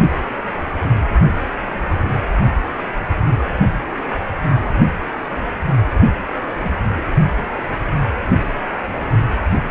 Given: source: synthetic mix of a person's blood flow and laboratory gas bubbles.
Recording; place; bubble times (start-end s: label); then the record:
Doppler ultrasound of blood flow; precordium
6.58-6.71 s: bubbles
6.96-7.02 s: bubbles
From the record:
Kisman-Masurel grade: 121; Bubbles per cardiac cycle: 1 to 2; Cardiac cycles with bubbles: 10 to 50%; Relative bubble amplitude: barely perceptible (0.100 to 0.250); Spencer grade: 2 (many but less than half of the cardiac periods contain bubble signals, singularly or in groups); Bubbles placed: only in the low amplitude regions of the cardiac cycle